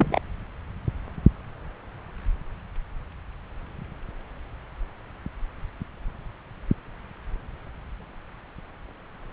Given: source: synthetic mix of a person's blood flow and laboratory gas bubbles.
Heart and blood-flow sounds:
Doppler ultrasound of blood flow; subclavian vein
0.00-0.20 s: bubbles
From the record:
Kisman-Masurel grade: 112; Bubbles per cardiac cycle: 1 to 2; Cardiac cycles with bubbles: 1 to 10%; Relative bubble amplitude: moderate (0.250 to 0.450); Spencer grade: 1 (occasional bubble signal discernible with the cardiac motion signal, with majority of cardiac periods free of bubbles); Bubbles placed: anywhere in the cardiac cycle

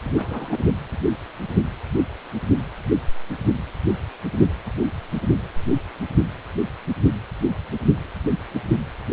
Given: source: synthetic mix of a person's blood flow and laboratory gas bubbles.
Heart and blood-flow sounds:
Doppler ultrasound of blood flow; precordium
0.04-0.62 s: bubbles
From the record:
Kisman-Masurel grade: 211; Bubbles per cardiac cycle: several, 3 to 8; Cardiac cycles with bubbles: 1 to 10%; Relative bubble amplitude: barely perceptible (0.100 to 0.250); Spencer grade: 1 (occasional bubble signal discernible with the cardiac motion signal, with majority of cardiac periods free of bubbles); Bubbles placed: anywhere in the cardiac cycle

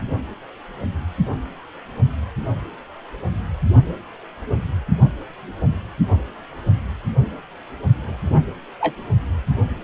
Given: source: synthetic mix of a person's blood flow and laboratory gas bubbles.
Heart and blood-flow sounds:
Doppler ultrasound of blood flow; precordium
8.05-8.41 s: bubbles
8.80-8.94 s: bubbles
From the record:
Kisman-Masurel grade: 112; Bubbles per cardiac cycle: 1 to 2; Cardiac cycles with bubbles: 1 to 10%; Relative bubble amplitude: moderate (0.250 to 0.450); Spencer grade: 1 (occasional bubble signal discernible with the cardiac motion signal, with majority of cardiac periods free of bubbles); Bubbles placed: only in the low amplitude regions of the cardiac cycle

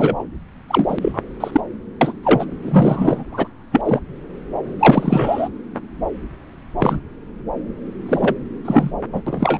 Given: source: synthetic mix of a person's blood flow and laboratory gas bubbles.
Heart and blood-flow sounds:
Doppler ultrasound of blood flow; subclavian vein
0.00-0.27 s: bubbles
0.68-0.98 s: bubbles
1.02-1.20 s: bubbles
1.40-1.61 s: bubbles
2.01-2.13 s: bubbles
2.23-2.45 s: bubbles
2.61-3.23 s: bubbles
3.31-3.48 s: bubbles
3.71-3.99 s: bubbles
4.79-5.49 s: bubbles
6.79-6.99 s: bubbles
8.05-8.34 s: bubbles
8.64-8.91 s: bubbles
9.12-9.21 s: bubbles
9.26-9.59 s: bubbles
From the record:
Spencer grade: 3 (all of the cardiac periods contain showers or single bubble signals, but not dominating or overriding the cardiac motion signals); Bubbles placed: anywhere in the cardiac cycle

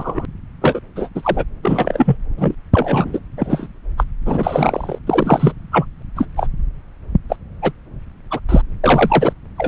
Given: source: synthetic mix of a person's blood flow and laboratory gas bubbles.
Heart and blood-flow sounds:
Doppler ultrasound of blood flow; subclavian vein
0.00-0.26 s: bubbles
0.61-0.80 s: bubbles
0.95-1.09 s: bubbles
1.15-1.45 s: bubbles
1.62-2.17 s: bubbles
2.36-2.54 s: bubbles
2.72-3.19 s: bubbles
3.37-3.67 s: bubbles
3.97-4.04 s: bubbles
4.26-4.98 s: bubbles
5.06-5.53 s: bubbles
5.72-5.85 s: bubbles
6.16-6.26 s: bubbles
6.36-6.47 s: bubbles
7.29-7.36 s: bubbles
7.62-7.72 s: bubbles
8.30-8.39 s: bubbles
8.48-8.62 s: bubbles
8.83-9.32 s: bubbles
9.56-9.68 s: bubbles
From the record:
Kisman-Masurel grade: 243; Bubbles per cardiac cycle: several, 3 to 8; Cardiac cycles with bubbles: 100%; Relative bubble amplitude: loud (0.450 to 0.775); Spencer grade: 3 (all of the cardiac periods contain showers or single bubble signals, but not dominating or overriding the cardiac motion signals); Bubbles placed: anywhere in the cardiac cycle

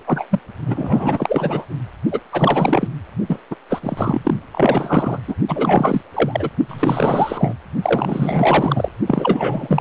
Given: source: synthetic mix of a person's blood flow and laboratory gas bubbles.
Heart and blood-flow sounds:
Doppler ultrasound of blood flow; precordium
0.07-0.27 s: bubbles
0.30-0.39 s: bubbles
0.66-1.65 s: bubbles
2.11-2.20 s: bubbles
2.31-2.90 s: bubbles
3.27-3.38 s: bubbles
3.50-3.55 s: bubbles
3.69-4.34 s: bubbles
4.52-5.19 s: bubbles
5.27-5.36 s: bubbles
5.48-6.01 s: bubbles
6.13-6.50 s: bubbles
6.68-7.54 s: bubbles
7.82-8.89 s: bubbles
9.06-9.81 s: bubbles
From the record:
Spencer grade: 4 (maximum detectable bubble signal sounding continuously throughout systole and diastole of every cardiac period, and overriding the amplitude of the normal cardiac signals); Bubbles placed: only in the low amplitude regions of the cardiac cycle

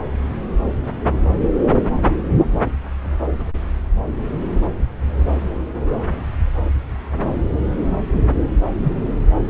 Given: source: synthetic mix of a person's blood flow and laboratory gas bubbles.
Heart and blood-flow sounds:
Doppler ultrasound of blood flow; subclavian vein
8.84-8.93 s: bubbles
From the record:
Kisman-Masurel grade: 112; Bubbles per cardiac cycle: 1 to 2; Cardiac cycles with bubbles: 1 to 10%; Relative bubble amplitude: moderate (0.250 to 0.450); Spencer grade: 1 (occasional bubble signal discernible with the cardiac motion signal, with majority of cardiac periods free of bubbles); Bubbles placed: anywhere in the cardiac cycle

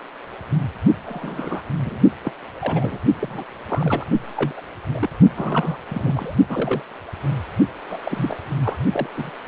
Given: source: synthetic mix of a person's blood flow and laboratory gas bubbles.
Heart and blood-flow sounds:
Doppler ultrasound of blood flow; precordium
1.05-1.63 s: bubbles
1.85-1.99 s: bubbles
2.22-2.32 s: bubbles
2.60-3.00 s: bubbles
3.19-3.44 s: bubbles
3.57-4.07 s: bubbles
4.36-4.61 s: bubbles
4.92-5.10 s: bubbles
5.36-5.77 s: bubbles
5.86-6.36 s: bubbles
6.50-6.82 s: bubbles
7.91-7.98 s: bubbles
8.04-8.37 s: bubbles
8.63-8.76 s: bubbles
8.92-9.09 s: bubbles
9.17-9.30 s: bubbles
From the record:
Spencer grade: 3 (all of the cardiac periods contain showers or single bubble signals, but not dominating or overriding the cardiac motion signals); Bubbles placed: only in the low amplitude regions of the cardiac cycle

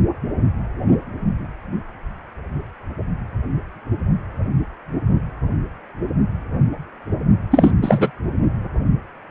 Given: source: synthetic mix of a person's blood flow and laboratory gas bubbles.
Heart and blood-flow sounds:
Doppler ultrasound of blood flow; precordium
7.51-7.71 s: bubbles
7.82-8.11 s: bubbles
From the record:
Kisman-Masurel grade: 213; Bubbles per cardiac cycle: several, 3 to 8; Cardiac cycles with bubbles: 1 to 10%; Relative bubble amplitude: loud (0.450 to 0.775); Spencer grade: 1 (occasional bubble signal discernible with the cardiac motion signal, with majority of cardiac periods free of bubbles); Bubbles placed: only in the low amplitude regions of the cardiac cycle

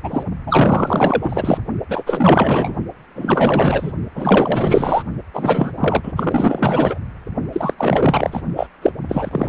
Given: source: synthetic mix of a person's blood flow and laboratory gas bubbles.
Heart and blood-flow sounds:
Doppler ultrasound of blood flow; precordium
0.03-0.23 s: bubbles
0.46-1.57 s: bubbles
1.89-2.04 s: bubbles
2.06-2.76 s: bubbles
3.15-3.93 s: bubbles
4.15-5.03 s: bubbles
5.33-5.72 s: bubbles
5.77-6.12 s: bubbles
6.15-6.98 s: bubbles
7.52-7.73 s: bubbles
7.77-8.42 s: bubbles
8.55-8.67 s: bubbles
8.82-8.93 s: bubbles
9.09-9.49 s: bubbles
From the record:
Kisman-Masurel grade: 444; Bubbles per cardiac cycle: continuous sound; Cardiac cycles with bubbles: 100%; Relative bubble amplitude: maximal (0.775 to 0.999); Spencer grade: 4 (maximum detectable bubble signal sounding continuously throughout systole and diastole of every cardiac period, and overriding the amplitude of the normal cardiac signals); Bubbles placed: only in the low amplitude regions of the cardiac cycle

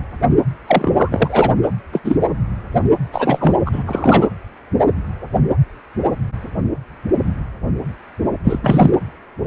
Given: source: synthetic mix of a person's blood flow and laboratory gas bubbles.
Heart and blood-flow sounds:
Doppler ultrasound of blood flow; precordium
0.66-0.92 s: bubbles
0.96-1.54 s: bubbles
1.92-2.00 s: bubbles
2.04-2.17 s: bubbles
3.12-3.53 s: bubbles
3.65-3.83 s: bubbles
3.86-4.28 s: bubbles
8.43-8.59 s: bubbles
8.62-8.90 s: bubbles
From the record:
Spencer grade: 2 (many but less than half of the cardiac periods contain bubble signals, singularly or in groups); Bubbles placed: anywhere in the cardiac cycle

